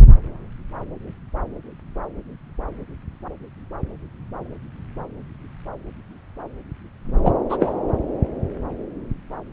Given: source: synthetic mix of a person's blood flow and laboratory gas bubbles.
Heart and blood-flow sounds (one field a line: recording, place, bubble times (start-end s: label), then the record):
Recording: Doppler ultrasound of blood flow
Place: subclavian vein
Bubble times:
7.25-7.32 s: bubbles
7.49-7.57 s: bubbles
7.60-7.74 s: bubbles
From the record:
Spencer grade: 1 (occasional bubble signal discernible with the cardiac motion signal, with majority of cardiac periods free of bubbles)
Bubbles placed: anywhere in the cardiac cycle